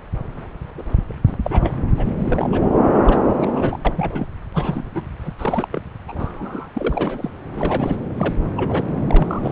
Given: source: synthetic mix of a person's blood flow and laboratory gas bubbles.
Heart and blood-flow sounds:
Doppler ultrasound of blood flow; subclavian vein
0.77-0.83 s: bubbles
1.09-1.15 s: bubbles
1.26-1.37 s: bubbles
1.43-1.74 s: bubbles
1.97-2.12 s: bubbles
2.18-2.61 s: bubbles
3.02-3.21 s: bubbles
3.40-3.77 s: bubbles
3.84-4.26 s: bubbles
4.53-4.92 s: bubbles
4.95-5.01 s: bubbles
5.24-5.30 s: bubbles
5.38-5.68 s: bubbles
5.72-5.86 s: bubbles
6.08-6.71 s: bubbles
6.74-7.30 s: bubbles
7.53-7.96 s: bubbles
8.18-8.34 s: bubbles
8.56-8.84 s: bubbles
9.09-9.52 s: bubbles
From the record:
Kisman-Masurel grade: 242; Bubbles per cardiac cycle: several, 3 to 8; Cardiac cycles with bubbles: 100%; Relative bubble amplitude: moderate (0.250 to 0.450); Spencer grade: 3 (all of the cardiac periods contain showers or single bubble signals, but not dominating or overriding the cardiac motion signals); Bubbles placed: anywhere in the cardiac cycle

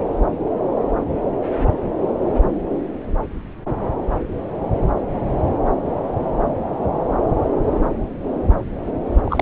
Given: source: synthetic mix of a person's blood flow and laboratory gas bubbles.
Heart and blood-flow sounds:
Doppler ultrasound of blood flow; subclavian vein
9.25-9.42 s: bubbles
From the record:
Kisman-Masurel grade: 212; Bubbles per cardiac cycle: several, 3 to 8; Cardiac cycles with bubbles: 1 to 10%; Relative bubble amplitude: moderate (0.250 to 0.450); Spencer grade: 1 (occasional bubble signal discernible with the cardiac motion signal, with majority of cardiac periods free of bubbles); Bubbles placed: anywhere in the cardiac cycle

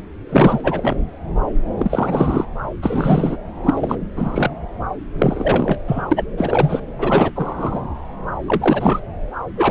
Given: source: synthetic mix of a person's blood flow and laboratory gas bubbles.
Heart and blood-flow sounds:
Doppler ultrasound of blood flow; subclavian vein
0.29-0.60 s: bubbles
0.64-0.95 s: bubbles
1.78-2.46 s: bubbles
2.82-3.37 s: bubbles
3.63-3.96 s: bubbles
4.16-4.50 s: bubbles
5.18-5.79 s: bubbles
5.87-6.08 s: bubbles
6.11-6.25 s: bubbles
6.37-6.81 s: bubbles
6.98-7.32 s: bubbles
7.35-7.80 s: bubbles
8.46-9.00 s: bubbles
9.56-9.71 s: bubbles
From the record:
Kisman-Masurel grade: 333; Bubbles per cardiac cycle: rolling drumbeat, 9 or more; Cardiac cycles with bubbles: 50 to 99%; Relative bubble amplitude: loud (0.450 to 0.775); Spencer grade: 3 (all of the cardiac periods contain showers or single bubble signals, but not dominating or overriding the cardiac motion signals); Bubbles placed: anywhere in the cardiac cycle

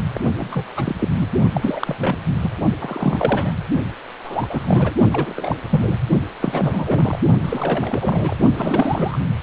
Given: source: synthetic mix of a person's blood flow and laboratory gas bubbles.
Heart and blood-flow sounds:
Doppler ultrasound of blood flow; precordium
0.14-0.20 s: bubbles
0.32-0.70 s: bubbles
0.76-0.96 s: bubbles
0.98-1.08 s: bubbles
1.14-1.28 s: bubbles
1.53-1.98 s: bubbles
2.00-2.17 s: bubbles
2.42-2.50 s: bubbles
2.79-3.54 s: bubbles
4.23-4.47 s: bubbles
4.49-4.96 s: bubbles
5.11-5.57 s: bubbles
5.70-5.98 s: bubbles
6.40-7.19 s: bubbles
7.44-8.37 s: bubbles
8.56-9.17 s: bubbles
From the record:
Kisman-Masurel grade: 342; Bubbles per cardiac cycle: rolling drumbeat, 9 or more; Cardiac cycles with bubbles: 100%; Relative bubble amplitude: moderate (0.250 to 0.450); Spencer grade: 3 (all of the cardiac periods contain showers or single bubble signals, but not dominating or overriding the cardiac motion signals); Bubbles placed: only in the low amplitude regions of the cardiac cycle

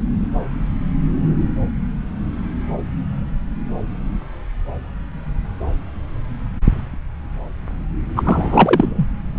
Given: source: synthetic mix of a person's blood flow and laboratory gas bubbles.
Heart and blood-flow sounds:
Doppler ultrasound of blood flow; subclavian vein
8.16-9.06 s: bubbles
From the record:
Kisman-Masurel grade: 213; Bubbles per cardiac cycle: several, 3 to 8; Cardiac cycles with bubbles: 1 to 10%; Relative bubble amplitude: loud (0.450 to 0.775); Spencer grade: 1 (occasional bubble signal discernible with the cardiac motion signal, with majority of cardiac periods free of bubbles); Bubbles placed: anywhere in the cardiac cycle

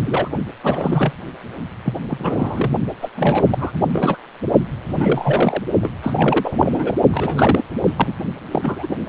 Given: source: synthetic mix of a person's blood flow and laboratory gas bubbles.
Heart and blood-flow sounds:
Doppler ultrasound of blood flow; precordium
0.04-0.28 s: bubbles
0.61-1.12 s: bubbles
1.84-1.93 s: bubbles
2.10-2.70 s: bubbles
3.01-3.09 s: bubbles
3.15-3.43 s: bubbles
3.51-3.71 s: bubbles
3.93-4.17 s: bubbles
4.87-5.63 s: bubbles
5.81-5.91 s: bubbles
6.02-6.96 s: bubbles
7.11-7.63 s: bubbles
7.84-7.93 s: bubbles
7.96-8.13 s: bubbles
8.51-9.00 s: bubbles
From the record:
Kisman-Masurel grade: 342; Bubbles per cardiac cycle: rolling drumbeat, 9 or more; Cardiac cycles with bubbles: 100%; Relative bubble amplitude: moderate (0.250 to 0.450); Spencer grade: 3 (all of the cardiac periods contain showers or single bubble signals, but not dominating or overriding the cardiac motion signals); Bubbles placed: only in the low amplitude regions of the cardiac cycle

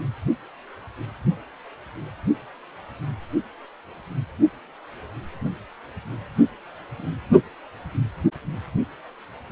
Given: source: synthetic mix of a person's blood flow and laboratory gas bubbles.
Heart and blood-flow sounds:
Doppler ultrasound of blood flow; precordium
no bubbles
From the record:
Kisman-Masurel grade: 000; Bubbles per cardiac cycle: 0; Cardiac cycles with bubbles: 0%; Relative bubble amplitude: no bubbles discernible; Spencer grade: 0 (complete lack of bubble signals)

